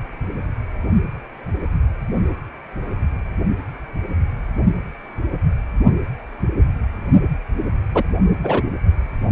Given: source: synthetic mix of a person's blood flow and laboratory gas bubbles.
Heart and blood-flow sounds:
Doppler ultrasound of blood flow; precordium
7.94-8.03 s: bubbles
8.43-8.62 s: bubbles
From the record:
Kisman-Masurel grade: 113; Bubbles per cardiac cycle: 1 to 2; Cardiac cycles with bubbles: 1 to 10%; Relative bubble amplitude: loud (0.450 to 0.775); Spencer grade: 1 (occasional bubble signal discernible with the cardiac motion signal, with majority of cardiac periods free of bubbles); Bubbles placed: only in the low amplitude regions of the cardiac cycle

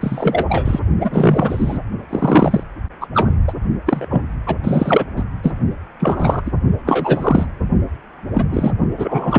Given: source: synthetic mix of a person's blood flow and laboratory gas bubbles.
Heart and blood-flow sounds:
Doppler ultrasound of blood flow; precordium
0.01-0.45 s: bubbles
0.48-0.80 s: bubbles
1.00-1.79 s: bubbles
2.09-2.63 s: bubbles
3.01-3.07 s: bubbles
3.14-3.30 s: bubbles
3.47-3.53 s: bubbles
3.86-4.06 s: bubbles
4.10-4.23 s: bubbles
4.46-4.56 s: bubbles
4.63-5.06 s: bubbles
5.17-5.24 s: bubbles
5.43-5.54 s: bubbles
6.00-6.42 s: bubbles
6.45-6.50 s: bubbles
6.87-7.46 s: bubbles
8.33-8.44 s: bubbles
8.48-8.71 s: bubbles
8.96-9.39 s: bubbles
From the record:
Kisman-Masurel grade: 243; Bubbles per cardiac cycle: several, 3 to 8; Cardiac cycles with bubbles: 100%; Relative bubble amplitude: loud (0.450 to 0.775); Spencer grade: 3 (all of the cardiac periods contain showers or single bubble signals, but not dominating or overriding the cardiac motion signals); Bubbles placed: only in the low amplitude regions of the cardiac cycle

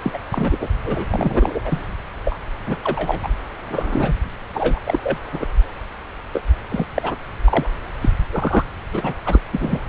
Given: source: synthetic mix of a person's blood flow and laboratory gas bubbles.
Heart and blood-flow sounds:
Doppler ultrasound of blood flow; subclavian vein
0.02-0.10 s: bubbles
0.13-0.18 s: bubbles
0.32-0.68 s: bubbles
0.85-1.06 s: bubbles
1.10-1.60 s: bubbles
1.65-1.88 s: bubbles
2.25-2.39 s: bubbles
2.66-2.76 s: bubbles
2.84-3.20 s: bubbles
3.23-3.30 s: bubbles
3.69-4.12 s: bubbles
4.54-4.79 s: bubbles
4.85-4.99 s: bubbles
5.03-5.17 s: bubbles
5.32-5.46 s: bubbles
6.33-6.40 s: bubbles
6.70-6.84 s: bubbles
6.94-7.16 s: bubbles
7.45-7.69 s: bubbles
8.01-8.10 s: bubbles
8.32-8.65 s: bubbles
8.93-9.13 s: bubbles
9.26-9.40 s: bubbles
9.52-9.79 s: bubbles
From the record:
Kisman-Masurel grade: 232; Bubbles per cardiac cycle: several, 3 to 8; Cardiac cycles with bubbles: 50 to 99%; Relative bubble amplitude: moderate (0.250 to 0.450); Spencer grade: 3 (all of the cardiac periods contain showers or single bubble signals, but not dominating or overriding the cardiac motion signals); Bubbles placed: anywhere in the cardiac cycle

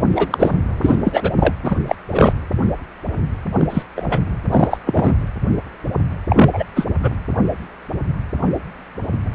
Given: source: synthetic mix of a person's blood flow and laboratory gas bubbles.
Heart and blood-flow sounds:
Doppler ultrasound of blood flow; precordium
0.15-0.52 s: bubbles
0.81-0.95 s: bubbles
1.04-1.31 s: bubbles
1.40-1.53 s: bubbles
1.64-1.75 s: bubbles
1.86-1.96 s: bubbles
2.10-2.33 s: bubbles
3.59-3.83 s: bubbles
3.96-4.22 s: bubbles
4.52-4.78 s: bubbles
4.86-5.16 s: bubbles
6.29-6.50 s: bubbles
6.53-6.63 s: bubbles
6.75-6.84 s: bubbles
7.02-7.11 s: bubbles
From the record:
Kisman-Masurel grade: 233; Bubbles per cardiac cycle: several, 3 to 8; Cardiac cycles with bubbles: 50 to 99%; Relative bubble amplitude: loud (0.450 to 0.775); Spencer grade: 3 (all of the cardiac periods contain showers or single bubble signals, but not dominating or overriding the cardiac motion signals); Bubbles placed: anywhere in the cardiac cycle

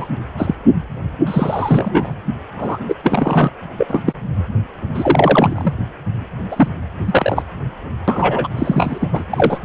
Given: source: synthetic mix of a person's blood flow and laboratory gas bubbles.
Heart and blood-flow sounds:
Doppler ultrasound of blood flow; precordium
0.00-0.07 s: bubbles
0.37-0.55 s: bubbles
1.26-2.14 s: bubbles
2.58-2.78 s: bubbles
2.88-2.95 s: bubbles
3.04-3.50 s: bubbles
3.78-4.03 s: bubbles
4.06-4.13 s: bubbles
4.94-5.74 s: bubbles
6.51-6.68 s: bubbles
7.05-7.42 s: bubbles
8.07-8.48 s: bubbles
8.55-9.23 s: bubbles
9.30-9.59 s: bubbles
From the record:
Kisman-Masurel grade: 243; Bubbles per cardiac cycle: several, 3 to 8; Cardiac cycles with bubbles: 100%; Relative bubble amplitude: loud (0.450 to 0.775); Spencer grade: 3 (all of the cardiac periods contain showers or single bubble signals, but not dominating or overriding the cardiac motion signals); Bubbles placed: anywhere in the cardiac cycle

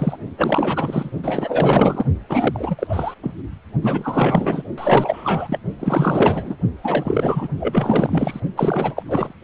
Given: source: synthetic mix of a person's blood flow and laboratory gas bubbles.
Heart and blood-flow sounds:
Doppler ultrasound of blood flow; precordium
0.00-0.17 s: bubbles
0.38-1.11 s: bubbles
1.23-2.05 s: bubbles
2.29-2.76 s: bubbles
2.79-3.14 s: bubbles
3.23-3.34 s: bubbles
3.81-4.63 s: bubbles
4.78-5.59 s: bubbles
5.79-6.58 s: bubbles
6.83-7.47 s: bubbles
7.60-8.40 s: bubbles
8.56-9.03 s: bubbles
9.05-9.36 s: bubbles
From the record:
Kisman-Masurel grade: 444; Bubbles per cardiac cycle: continuous sound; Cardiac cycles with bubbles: 100%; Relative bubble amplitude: maximal (0.775 to 0.999); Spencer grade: 4 (maximum detectable bubble signal sounding continuously throughout systole and diastole of every cardiac period, and overriding the amplitude of the normal cardiac signals); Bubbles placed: only in the low amplitude regions of the cardiac cycle

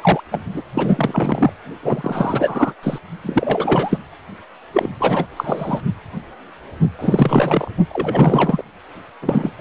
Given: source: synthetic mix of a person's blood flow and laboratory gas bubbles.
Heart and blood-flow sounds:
Doppler ultrasound of blood flow; precordium
0.00-0.21 s: bubbles
0.31-0.42 s: bubbles
0.54-0.64 s: bubbles
0.74-1.53 s: bubbles
1.82-2.74 s: bubbles
2.83-2.99 s: bubbles
3.24-3.98 s: bubbles
4.73-4.91 s: bubbles
4.99-5.27 s: bubbles
5.36-5.81 s: bubbles
6.99-7.71 s: bubbles
7.89-8.62 s: bubbles
9.21-9.50 s: bubbles
9.59-9.61 s: bubbles
From the record:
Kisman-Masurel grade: 333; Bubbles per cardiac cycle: rolling drumbeat, 9 or more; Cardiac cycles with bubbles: 50 to 99%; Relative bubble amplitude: loud (0.450 to 0.775); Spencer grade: 3 (all of the cardiac periods contain showers or single bubble signals, but not dominating or overriding the cardiac motion signals); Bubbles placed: only in the low amplitude regions of the cardiac cycle

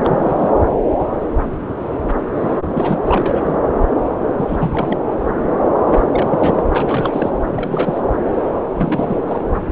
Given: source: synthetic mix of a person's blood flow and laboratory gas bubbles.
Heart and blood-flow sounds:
Doppler ultrasound of blood flow; subclavian vein
0.04-0.52 s: bubbles
2.34-2.58 s: bubbles
2.75-3.00 s: bubbles
3.06-3.56 s: bubbles
4.37-4.98 s: bubbles
5.87-6.67 s: bubbles
6.75-7.30 s: bubbles
7.50-8.02 s: bubbles
8.74-9.20 s: bubbles
9.24-9.45 s: bubbles
From the record:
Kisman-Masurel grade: 332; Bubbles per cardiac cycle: rolling drumbeat, 9 or more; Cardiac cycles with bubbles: 50 to 99%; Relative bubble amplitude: moderate (0.250 to 0.450); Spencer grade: 3 (all of the cardiac periods contain showers or single bubble signals, but not dominating or overriding the cardiac motion signals); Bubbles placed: anywhere in the cardiac cycle

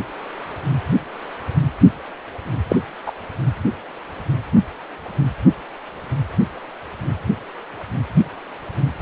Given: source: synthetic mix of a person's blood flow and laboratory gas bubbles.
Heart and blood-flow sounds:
Doppler ultrasound of blood flow; precordium
2.69-2.76 s: bubbles
3.06-3.12 s: bubbles
From the record:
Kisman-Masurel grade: 113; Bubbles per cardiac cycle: 1 to 2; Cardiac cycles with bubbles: 1 to 10%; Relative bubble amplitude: loud (0.450 to 0.775); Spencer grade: 1 (occasional bubble signal discernible with the cardiac motion signal, with majority of cardiac periods free of bubbles); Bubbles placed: anywhere in the cardiac cycle

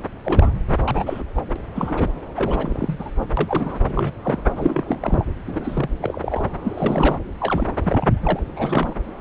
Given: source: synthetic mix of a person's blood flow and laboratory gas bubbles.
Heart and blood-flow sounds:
Doppler ultrasound of blood flow; subclavian vein
0.24-0.51 s: bubbles
0.84-1.24 s: bubbles
1.35-1.45 s: bubbles
1.55-1.58 s: bubbles
1.74-2.08 s: bubbles
2.36-3.10 s: bubbles
3.37-3.79 s: bubbles
3.85-4.12 s: bubbles
4.22-4.42 s: bubbles
4.55-5.26 s: bubbles
5.46-5.89 s: bubbles
6.01-6.45 s: bubbles
6.63-7.18 s: bubbles
7.39-7.71 s: bubbles
7.83-8.39 s: bubbles
8.56-8.96 s: bubbles
From the record:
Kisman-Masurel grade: 242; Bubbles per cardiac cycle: several, 3 to 8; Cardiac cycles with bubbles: 100%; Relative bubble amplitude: moderate (0.250 to 0.450); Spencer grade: 3 (all of the cardiac periods contain showers or single bubble signals, but not dominating or overriding the cardiac motion signals); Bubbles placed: anywhere in the cardiac cycle

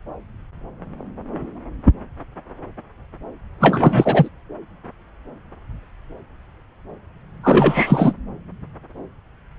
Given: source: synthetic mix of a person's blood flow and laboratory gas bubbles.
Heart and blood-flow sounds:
Doppler ultrasound of blood flow; subclavian vein
3.60-4.29 s: bubbles
7.43-8.13 s: bubbles
From the record:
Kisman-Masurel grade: 223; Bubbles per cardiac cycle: several, 3 to 8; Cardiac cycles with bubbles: 10 to 50%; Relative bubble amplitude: loud (0.450 to 0.775); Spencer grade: 2 (many but less than half of the cardiac periods contain bubble signals, singularly or in groups); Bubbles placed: anywhere in the cardiac cycle

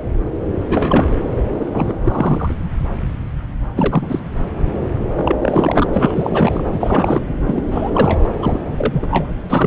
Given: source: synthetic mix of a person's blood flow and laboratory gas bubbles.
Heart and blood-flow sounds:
Doppler ultrasound of blood flow; subclavian vein
0.59-1.17 s: bubbles
1.59-1.94 s: bubbles
2.02-2.54 s: bubbles
3.75-4.19 s: bubbles
5.16-5.36 s: bubbles
5.42-6.64 s: bubbles
6.73-7.25 s: bubbles
7.47-7.63 s: bubbles
7.71-8.28 s: bubbles
8.42-8.60 s: bubbles
8.74-9.34 s: bubbles
9.49-9.67 s: bubbles
From the record:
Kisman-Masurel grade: 333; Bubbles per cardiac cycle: rolling drumbeat, 9 or more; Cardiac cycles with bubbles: 50 to 99%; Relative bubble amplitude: loud (0.450 to 0.775); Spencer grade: 3 (all of the cardiac periods contain showers or single bubble signals, but not dominating or overriding the cardiac motion signals); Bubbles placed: anywhere in the cardiac cycle

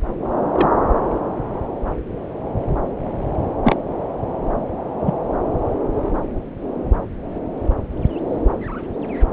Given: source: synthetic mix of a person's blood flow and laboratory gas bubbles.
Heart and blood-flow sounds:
Doppler ultrasound of blood flow; subclavian vein
0.52-0.69 s: bubbles
3.64-3.76 s: bubbles
5.05-5.13 s: bubbles
From the record:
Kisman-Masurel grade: 123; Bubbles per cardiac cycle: 1 to 2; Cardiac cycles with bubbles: 10 to 50%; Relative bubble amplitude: loud (0.450 to 0.775); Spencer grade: 2 (many but less than half of the cardiac periods contain bubble signals, singularly or in groups); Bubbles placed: anywhere in the cardiac cycle

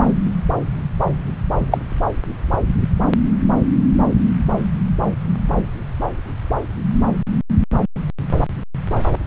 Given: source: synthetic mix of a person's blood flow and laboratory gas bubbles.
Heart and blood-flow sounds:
Doppler ultrasound of blood flow; subclavian vein
1.71-1.77 s: bubbles
From the record:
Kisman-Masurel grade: 123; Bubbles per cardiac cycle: 1 to 2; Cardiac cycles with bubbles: 10 to 50%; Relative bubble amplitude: loud (0.450 to 0.775); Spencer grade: 2 (many but less than half of the cardiac periods contain bubble signals, singularly or in groups); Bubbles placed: anywhere in the cardiac cycle

